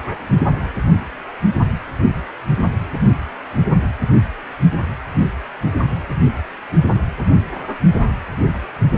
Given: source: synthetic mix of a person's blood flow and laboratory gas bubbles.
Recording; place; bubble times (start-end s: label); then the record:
Doppler ultrasound of blood flow; precordium
no bubbles
From the record:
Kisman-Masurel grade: 000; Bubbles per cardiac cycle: 0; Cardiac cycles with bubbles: 0%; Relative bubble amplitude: no bubbles discernible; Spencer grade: 0 (complete lack of bubble signals)